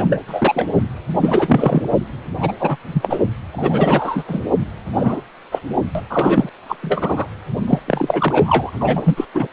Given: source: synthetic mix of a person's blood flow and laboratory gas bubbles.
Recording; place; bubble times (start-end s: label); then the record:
Doppler ultrasound of blood flow; precordium
0.00-0.17 s: bubbles
0.28-0.66 s: bubbles
1.20-1.86 s: bubbles
2.39-2.53 s: bubbles
2.59-2.77 s: bubbles
2.93-3.19 s: bubbles
3.54-4.24 s: bubbles
4.28-4.40 s: bubbles
4.95-5.22 s: bubbles
5.51-5.59 s: bubbles
5.95-6.01 s: bubbles
6.10-6.50 s: bubbles
6.69-6.76 s: bubbles
6.83-7.27 s: bubbles
7.67-7.80 s: bubbles
7.87-8.71 s: bubbles
8.80-9.25 s: bubbles
9.34-9.47 s: bubbles
From the record:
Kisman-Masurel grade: 243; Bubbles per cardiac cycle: several, 3 to 8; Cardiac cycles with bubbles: 100%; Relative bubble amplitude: loud (0.450 to 0.775); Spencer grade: 3 (all of the cardiac periods contain showers or single bubble signals, but not dominating or overriding the cardiac motion signals); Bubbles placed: anywhere in the cardiac cycle